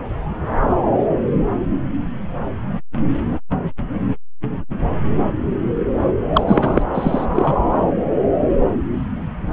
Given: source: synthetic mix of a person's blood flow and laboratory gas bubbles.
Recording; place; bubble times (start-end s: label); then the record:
Doppler ultrasound of blood flow; subclavian vein
6.33-6.43 s: bubbles
6.46-6.82 s: bubbles
6.94-7.26 s: bubbles
7.35-7.57 s: bubbles
From the record:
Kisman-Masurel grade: 213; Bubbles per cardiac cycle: several, 3 to 8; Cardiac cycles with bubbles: 1 to 10%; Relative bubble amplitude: loud (0.450 to 0.775); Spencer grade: 1 (occasional bubble signal discernible with the cardiac motion signal, with majority of cardiac periods free of bubbles); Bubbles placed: anywhere in the cardiac cycle